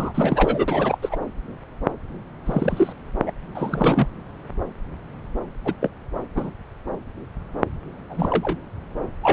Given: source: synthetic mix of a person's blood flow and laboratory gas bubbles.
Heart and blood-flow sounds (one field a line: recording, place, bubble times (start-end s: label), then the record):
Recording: Doppler ultrasound of blood flow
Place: subclavian vein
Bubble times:
0.00-0.99 s: bubbles
1.01-1.17 s: bubbles
2.46-2.93 s: bubbles
3.26-3.33 s: bubbles
3.54-4.06 s: bubbles
5.64-5.73 s: bubbles
5.80-5.89 s: bubbles
6.34-6.50 s: bubbles
8.09-8.58 s: bubbles
9.22-9.33 s: bubbles
From the record:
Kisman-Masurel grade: 232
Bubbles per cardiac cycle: several, 3 to 8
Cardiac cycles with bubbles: 50 to 99%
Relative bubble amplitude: moderate (0.250 to 0.450)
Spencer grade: 3 (all of the cardiac periods contain showers or single bubble signals, but not dominating or overriding the cardiac motion signals)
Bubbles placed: anywhere in the cardiac cycle